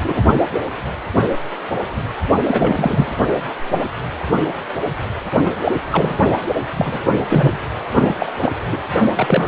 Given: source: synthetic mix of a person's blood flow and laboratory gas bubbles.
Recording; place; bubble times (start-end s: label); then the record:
Doppler ultrasound of blood flow; precordium
0.00-0.22 s: bubbles
2.44-3.13 s: bubbles
5.44-5.52 s: bubbles
5.64-5.72 s: bubbles
5.92-6.16 s: bubbles
6.27-6.33 s: bubbles
6.54-6.61 s: bubbles
6.77-6.99 s: bubbles
7.29-7.59 s: bubbles
7.95-8.15 s: bubbles
8.18-8.26 s: bubbles
8.40-8.54 s: bubbles
8.71-8.79 s: bubbles
9.15-9.48 s: bubbles
From the record:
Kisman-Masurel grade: 333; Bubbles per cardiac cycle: rolling drumbeat, 9 or more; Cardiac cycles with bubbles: 50 to 99%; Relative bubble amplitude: loud (0.450 to 0.775); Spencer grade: 3 (all of the cardiac periods contain showers or single bubble signals, but not dominating or overriding the cardiac motion signals); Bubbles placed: only in the low amplitude regions of the cardiac cycle